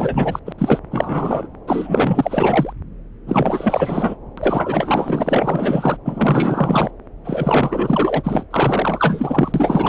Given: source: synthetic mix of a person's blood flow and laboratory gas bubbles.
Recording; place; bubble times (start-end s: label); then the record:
Doppler ultrasound of blood flow; subclavian vein
0.00-0.40 s: bubbles
0.45-0.52 s: bubbles
0.58-0.79 s: bubbles
0.91-1.47 s: bubbles
1.67-2.73 s: bubbles
3.26-4.16 s: bubbles
4.37-5.97 s: bubbles
6.05-6.91 s: bubbles
7.24-8.46 s: bubbles
8.50-9.89 s: bubbles
From the record:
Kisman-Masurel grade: 444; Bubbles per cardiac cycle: continuous sound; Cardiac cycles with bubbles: 100%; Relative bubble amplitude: maximal (0.775 to 0.999); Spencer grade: 4 (maximum detectable bubble signal sounding continuously throughout systole and diastole of every cardiac period, and overriding the amplitude of the normal cardiac signals); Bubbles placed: anywhere in the cardiac cycle